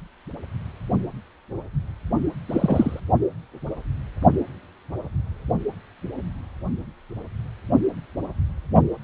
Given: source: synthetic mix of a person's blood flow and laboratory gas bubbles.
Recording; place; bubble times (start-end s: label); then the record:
Doppler ultrasound of blood flow; precordium
2.50-3.00 s: bubbles
From the record:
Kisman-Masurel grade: 223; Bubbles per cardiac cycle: several, 3 to 8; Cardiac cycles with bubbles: 10 to 50%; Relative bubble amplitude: loud (0.450 to 0.775); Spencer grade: 2 (many but less than half of the cardiac periods contain bubble signals, singularly or in groups); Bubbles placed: only in the low amplitude regions of the cardiac cycle